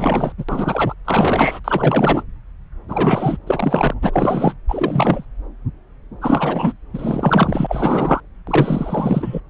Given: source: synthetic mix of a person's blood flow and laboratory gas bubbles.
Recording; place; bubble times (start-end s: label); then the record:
Doppler ultrasound of blood flow; subclavian vein
0.00-0.33 s: bubbles
0.37-0.44 s: bubbles
0.49-0.95 s: bubbles
1.05-1.59 s: bubbles
1.64-2.23 s: bubbles
2.88-3.37 s: bubbles
3.46-3.94 s: bubbles
4.02-4.53 s: bubbles
4.68-5.25 s: bubbles
6.21-6.72 s: bubbles
6.93-8.21 s: bubbles
8.47-9.40 s: bubbles
From the record:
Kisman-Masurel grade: 333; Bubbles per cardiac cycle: rolling drumbeat, 9 or more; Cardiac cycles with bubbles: 50 to 99%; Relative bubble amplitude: loud (0.450 to 0.775); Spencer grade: 3 (all of the cardiac periods contain showers or single bubble signals, but not dominating or overriding the cardiac motion signals); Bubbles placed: anywhere in the cardiac cycle